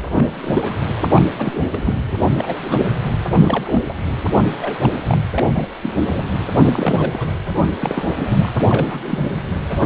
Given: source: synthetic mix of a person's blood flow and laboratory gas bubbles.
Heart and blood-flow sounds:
Doppler ultrasound of blood flow; precordium
0.13-0.76 s: bubbles
1.16-1.24 s: bubbles
1.38-1.61 s: bubbles
1.72-1.94 s: bubbles
2.08-2.17 s: bubbles
2.38-2.56 s: bubbles
2.71-2.77 s: bubbles
2.90-2.95 s: bubbles
3.23-3.86 s: bubbles
3.89-3.94 s: bubbles
4.60-4.76 s: bubbles
4.81-4.96 s: bubbles
5.07-5.17 s: bubbles
5.33-5.68 s: bubbles
5.82-6.29 s: bubbles
6.57-7.35 s: bubbles
7.79-8.12 s: bubbles
8.19-8.51 s: bubbles
8.58-9.03 s: bubbles
9.07-9.30 s: bubbles
9.34-9.42 s: bubbles
9.69-9.86 s: bubbles
From the record:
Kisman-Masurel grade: 242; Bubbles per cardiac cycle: several, 3 to 8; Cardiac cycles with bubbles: 100%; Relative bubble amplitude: moderate (0.250 to 0.450); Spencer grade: 3 (all of the cardiac periods contain showers or single bubble signals, but not dominating or overriding the cardiac motion signals); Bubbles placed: anywhere in the cardiac cycle

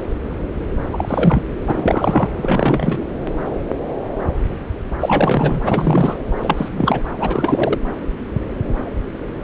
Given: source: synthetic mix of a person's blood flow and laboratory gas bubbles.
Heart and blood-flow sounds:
Doppler ultrasound of blood flow; subclavian vein
0.92-1.45 s: bubbles
1.67-2.28 s: bubbles
2.37-3.07 s: bubbles
5.00-5.60 s: bubbles
5.64-6.18 s: bubbles
6.42-6.68 s: bubbles
6.71-7.04 s: bubbles
7.18-7.79 s: bubbles
From the record:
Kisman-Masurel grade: 333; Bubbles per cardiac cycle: rolling drumbeat, 9 or more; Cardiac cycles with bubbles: 50 to 99%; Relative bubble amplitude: loud (0.450 to 0.775); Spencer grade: 3 (all of the cardiac periods contain showers or single bubble signals, but not dominating or overriding the cardiac motion signals); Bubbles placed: anywhere in the cardiac cycle

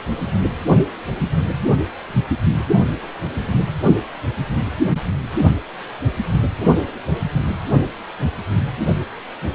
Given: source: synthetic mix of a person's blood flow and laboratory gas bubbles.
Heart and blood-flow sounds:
Doppler ultrasound of blood flow; precordium
9.41-9.49 s: bubbles
From the record:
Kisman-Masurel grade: 111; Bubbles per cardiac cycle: 1 to 2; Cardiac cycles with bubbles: 1 to 10%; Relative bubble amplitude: barely perceptible (0.100 to 0.250); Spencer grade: 1 (occasional bubble signal discernible with the cardiac motion signal, with majority of cardiac periods free of bubbles); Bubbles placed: only in the low amplitude regions of the cardiac cycle

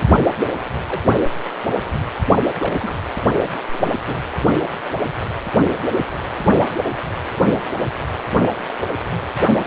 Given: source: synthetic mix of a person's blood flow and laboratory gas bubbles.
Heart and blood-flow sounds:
Doppler ultrasound of blood flow; precordium
0.86-1.01 s: bubbles
2.59-2.95 s: bubbles
3.73-3.78 s: bubbles
4.04-4.17 s: bubbles
From the record:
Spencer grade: 2 (many but less than half of the cardiac periods contain bubble signals, singularly or in groups); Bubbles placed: only in the low amplitude regions of the cardiac cycle

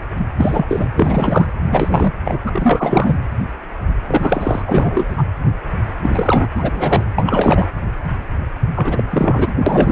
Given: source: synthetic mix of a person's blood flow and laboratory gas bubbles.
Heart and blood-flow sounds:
Doppler ultrasound of blood flow; precordium
0.38-0.65 s: bubbles
0.68-0.88 s: bubbles
0.96-1.46 s: bubbles
1.71-2.12 s: bubbles
2.25-2.39 s: bubbles
2.46-3.16 s: bubbles
4.07-4.63 s: bubbles
4.67-5.24 s: bubbles
6.02-6.47 s: bubbles
6.54-7.04 s: bubbles
7.15-7.67 s: bubbles
8.75-9.04 s: bubbles
9.11-9.53 s: bubbles
9.66-9.92 s: bubbles
From the record:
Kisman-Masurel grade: 333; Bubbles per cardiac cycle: rolling drumbeat, 9 or more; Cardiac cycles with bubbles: 50 to 99%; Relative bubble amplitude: loud (0.450 to 0.775); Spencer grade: 3 (all of the cardiac periods contain showers or single bubble signals, but not dominating or overriding the cardiac motion signals); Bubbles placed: anywhere in the cardiac cycle

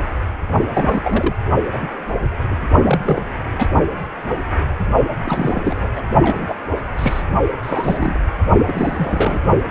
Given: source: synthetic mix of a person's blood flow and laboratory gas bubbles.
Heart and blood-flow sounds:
Doppler ultrasound of blood flow; precordium
0.74-1.33 s: bubbles
1.65-1.69 s: bubbles
1.73-1.93 s: bubbles
2.49-2.56 s: bubbles
2.83-3.00 s: bubbles
3.05-3.22 s: bubbles
3.52-3.68 s: bubbles
5.24-5.61 s: bubbles
5.63-5.88 s: bubbles
5.96-6.02 s: bubbles
6.22-6.54 s: bubbles
6.97-7.23 s: bubbles
7.62-8.20 s: bubbles
8.66-9.39 s: bubbles
9.69-9.71 s: bubbles
From the record:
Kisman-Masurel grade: 232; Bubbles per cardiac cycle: several, 3 to 8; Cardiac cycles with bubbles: 50 to 99%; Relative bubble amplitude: moderate (0.250 to 0.450); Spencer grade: 3 (all of the cardiac periods contain showers or single bubble signals, but not dominating or overriding the cardiac motion signals); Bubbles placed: only in the low amplitude regions of the cardiac cycle

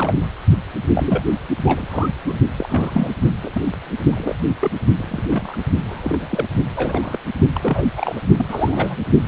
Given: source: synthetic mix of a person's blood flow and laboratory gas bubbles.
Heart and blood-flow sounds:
Doppler ultrasound of blood flow; precordium
0.00-0.27 s: bubbles
0.94-1.25 s: bubbles
1.65-1.87 s: bubbles
1.90-2.10 s: bubbles
2.27-2.39 s: bubbles
2.56-3.10 s: bubbles
3.43-3.64 s: bubbles
4.10-4.38 s: bubbles
4.61-4.71 s: bubbles
4.97-5.56 s: bubbles
5.84-6.48 s: bubbles
6.75-7.19 s: bubbles
7.54-7.85 s: bubbles
7.96-8.21 s: bubbles
8.37-8.45 s: bubbles
8.48-8.97 s: bubbles
From the record:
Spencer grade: 3 (all of the cardiac periods contain showers or single bubble signals, but not dominating or overriding the cardiac motion signals); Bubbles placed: only in the low amplitude regions of the cardiac cycle

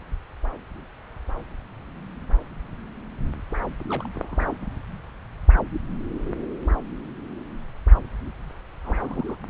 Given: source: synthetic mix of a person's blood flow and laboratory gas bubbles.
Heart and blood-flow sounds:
Doppler ultrasound of blood flow; subclavian vein
3.89-4.08 s: bubbles
4.13-4.55 s: bubbles
8.83-9.36 s: bubbles
From the record:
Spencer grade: 2 (many but less than half of the cardiac periods contain bubble signals, singularly or in groups); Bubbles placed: anywhere in the cardiac cycle

